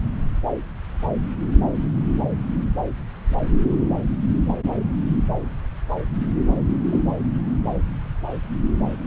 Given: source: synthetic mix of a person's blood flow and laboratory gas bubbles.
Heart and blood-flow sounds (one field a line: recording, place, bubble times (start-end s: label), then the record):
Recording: Doppler ultrasound of blood flow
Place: subclavian vein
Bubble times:
6.91-7.01 s: bubbles
From the record:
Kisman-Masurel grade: 112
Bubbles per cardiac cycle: 1 to 2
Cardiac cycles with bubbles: 1 to 10%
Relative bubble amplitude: moderate (0.250 to 0.450)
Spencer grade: 1 (occasional bubble signal discernible with the cardiac motion signal, with majority of cardiac periods free of bubbles)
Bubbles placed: anywhere in the cardiac cycle